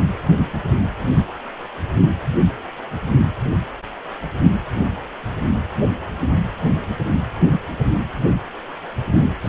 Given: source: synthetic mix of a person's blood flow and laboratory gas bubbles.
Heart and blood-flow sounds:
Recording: Doppler ultrasound of blood flow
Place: precordium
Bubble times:
9.44-9.49 s: bubbles
From the record:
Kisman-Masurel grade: 212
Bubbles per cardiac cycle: several, 3 to 8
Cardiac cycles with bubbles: 1 to 10%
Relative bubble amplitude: moderate (0.250 to 0.450)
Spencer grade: 1 (occasional bubble signal discernible with the cardiac motion signal, with majority of cardiac periods free of bubbles)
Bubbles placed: only in the low amplitude regions of the cardiac cycle

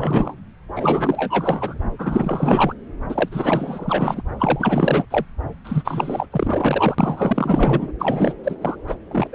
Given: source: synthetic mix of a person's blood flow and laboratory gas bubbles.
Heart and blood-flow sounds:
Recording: Doppler ultrasound of blood flow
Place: subclavian vein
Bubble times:
0.00-0.35 s: bubbles
0.76-1.79 s: bubbles
1.98-2.74 s: bubbles
3.09-3.29 s: bubbles
3.31-4.22 s: bubbles
4.39-5.05 s: bubbles
5.10-5.25 s: bubbles
5.64-6.26 s: bubbles
6.32-6.95 s: bubbles
6.98-7.92 s: bubbles
7.99-8.33 s: bubbles
8.43-8.57 s: bubbles
8.61-8.76 s: bubbles
8.88-8.95 s: bubbles
9.11-9.27 s: bubbles
9.32-9.35 s: bubbles
From the record:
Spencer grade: 4 (maximum detectable bubble signal sounding continuously throughout systole and diastole of every cardiac period, and overriding the amplitude of the normal cardiac signals)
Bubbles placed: anywhere in the cardiac cycle

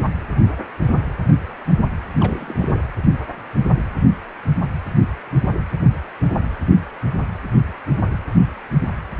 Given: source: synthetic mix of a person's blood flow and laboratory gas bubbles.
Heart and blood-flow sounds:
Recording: Doppler ultrasound of blood flow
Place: precordium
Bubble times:
2.20-2.80 s: bubbles
From the record:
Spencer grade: 1 (occasional bubble signal discernible with the cardiac motion signal, with majority of cardiac periods free of bubbles)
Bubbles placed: anywhere in the cardiac cycle

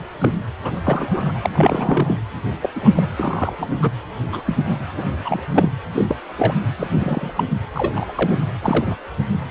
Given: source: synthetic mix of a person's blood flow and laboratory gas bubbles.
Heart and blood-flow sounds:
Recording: Doppler ultrasound of blood flow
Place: precordium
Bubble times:
0.20-0.35 s: bubbles
0.64-0.80 s: bubbles
0.84-1.32 s: bubbles
1.42-1.49 s: bubbles
1.53-2.17 s: bubbles
2.62-2.69 s: bubbles
2.75-3.08 s: bubbles
3.17-3.56 s: bubbles
3.58-3.90 s: bubbles
4.31-4.42 s: bubbles
4.46-4.57 s: bubbles
4.65-4.79 s: bubbles
4.96-5.04 s: bubbles
5.24-5.43 s: bubbles
5.51-5.69 s: bubbles
5.92-6.15 s: bubbles
6.38-6.54 s: bubbles
6.79-6.87 s: bubbles
6.94-7.32 s: bubbles
7.37-7.43 s: bubbles
7.75-8.12 s: bubbles
8.15-8.38 s: bubbles
8.62-8.96 s: bubbles
From the record:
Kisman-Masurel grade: 242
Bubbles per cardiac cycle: several, 3 to 8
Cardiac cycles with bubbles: 100%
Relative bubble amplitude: moderate (0.250 to 0.450)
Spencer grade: 3 (all of the cardiac periods contain showers or single bubble signals, but not dominating or overriding the cardiac motion signals)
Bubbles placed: anywhere in the cardiac cycle

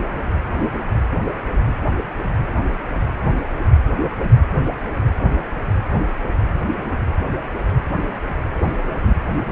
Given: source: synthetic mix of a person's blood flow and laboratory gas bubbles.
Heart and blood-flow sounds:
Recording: Doppler ultrasound of blood flow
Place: precordium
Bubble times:
8.57-8.78 s: bubbles
8.83-8.92 s: bubbles
9.01-9.17 s: bubbles
From the record:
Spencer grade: 1 (occasional bubble signal discernible with the cardiac motion signal, with majority of cardiac periods free of bubbles)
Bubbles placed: anywhere in the cardiac cycle

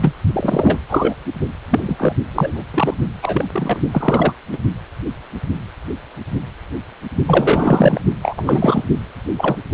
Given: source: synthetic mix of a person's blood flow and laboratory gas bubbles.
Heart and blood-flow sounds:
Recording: Doppler ultrasound of blood flow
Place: precordium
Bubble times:
0.01-0.14 s: bubbles
0.33-0.78 s: bubbles
0.89-1.14 s: bubbles
1.70-2.14 s: bubbles
2.34-2.62 s: bubbles
2.74-2.94 s: bubbles
3.22-3.45 s: bubbles
3.52-3.80 s: bubbles
3.91-4.33 s: bubbles
4.52-4.58 s: bubbles
7.26-8.01 s: bubbles
8.22-8.83 s: bubbles
9.37-9.57 s: bubbles
From the record:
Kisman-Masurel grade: 233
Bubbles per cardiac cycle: several, 3 to 8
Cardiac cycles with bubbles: 50 to 99%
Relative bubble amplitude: loud (0.450 to 0.775)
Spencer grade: 3 (all of the cardiac periods contain showers or single bubble signals, but not dominating or overriding the cardiac motion signals)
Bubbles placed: only in the low amplitude regions of the cardiac cycle

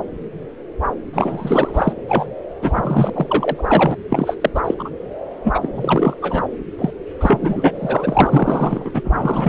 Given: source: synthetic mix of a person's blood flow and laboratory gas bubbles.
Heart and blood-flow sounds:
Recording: Doppler ultrasound of blood flow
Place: subclavian vein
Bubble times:
1.13-1.93 s: bubbles
2.08-2.27 s: bubbles
2.62-3.10 s: bubbles
3.14-3.96 s: bubbles
4.09-4.37 s: bubbles
4.41-4.50 s: bubbles
4.54-4.61 s: bubbles
4.65-4.75 s: bubbles
4.79-4.91 s: bubbles
5.44-5.71 s: bubbles
5.74-6.16 s: bubbles
6.21-6.43 s: bubbles
6.79-6.91 s: bubbles
7.21-7.38 s: bubbles
7.42-7.72 s: bubbles
7.75-8.91 s: bubbles
8.94-9.01 s: bubbles
9.04-9.49 s: bubbles
From the record:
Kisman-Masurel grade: 333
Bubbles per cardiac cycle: rolling drumbeat, 9 or more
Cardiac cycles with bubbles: 50 to 99%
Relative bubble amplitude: loud (0.450 to 0.775)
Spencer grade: 3 (all of the cardiac periods contain showers or single bubble signals, but not dominating or overriding the cardiac motion signals)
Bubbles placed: anywhere in the cardiac cycle

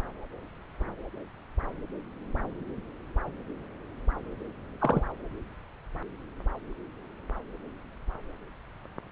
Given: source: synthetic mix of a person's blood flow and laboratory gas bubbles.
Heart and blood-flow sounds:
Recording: Doppler ultrasound of blood flow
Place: subclavian vein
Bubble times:
4.80-5.03 s: bubbles
From the record:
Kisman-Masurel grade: 111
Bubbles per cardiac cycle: 1 to 2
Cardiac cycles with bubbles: 1 to 10%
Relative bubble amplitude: barely perceptible (0.100 to 0.250)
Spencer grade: 1 (occasional bubble signal discernible with the cardiac motion signal, with majority of cardiac periods free of bubbles)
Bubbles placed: anywhere in the cardiac cycle

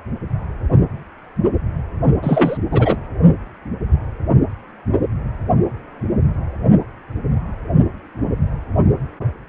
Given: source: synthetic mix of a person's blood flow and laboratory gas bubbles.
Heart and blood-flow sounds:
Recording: Doppler ultrasound of blood flow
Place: precordium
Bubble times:
2.23-2.57 s: bubbles
2.71-2.96 s: bubbles
From the record:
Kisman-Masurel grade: 213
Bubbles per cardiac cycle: several, 3 to 8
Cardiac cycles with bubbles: 1 to 10%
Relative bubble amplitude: loud (0.450 to 0.775)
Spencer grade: 1 (occasional bubble signal discernible with the cardiac motion signal, with majority of cardiac periods free of bubbles)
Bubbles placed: only in the low amplitude regions of the cardiac cycle

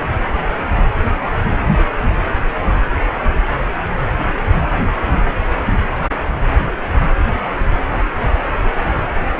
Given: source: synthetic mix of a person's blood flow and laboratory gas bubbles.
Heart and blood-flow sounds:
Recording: Doppler ultrasound of blood flow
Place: precordium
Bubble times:
7.94-7.99 s: bubbles
From the record:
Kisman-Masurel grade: 111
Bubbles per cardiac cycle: 1 to 2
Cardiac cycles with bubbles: 1 to 10%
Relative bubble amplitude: barely perceptible (0.100 to 0.250)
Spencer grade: 1 (occasional bubble signal discernible with the cardiac motion signal, with majority of cardiac periods free of bubbles)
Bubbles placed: anywhere in the cardiac cycle

